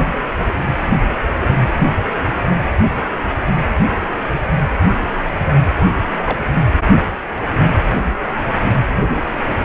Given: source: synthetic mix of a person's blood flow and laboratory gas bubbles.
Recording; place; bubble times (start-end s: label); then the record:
Doppler ultrasound of blood flow; precordium
6.25-6.38 s: bubbles
From the record:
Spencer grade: 2 (many but less than half of the cardiac periods contain bubble signals, singularly or in groups); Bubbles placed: anywhere in the cardiac cycle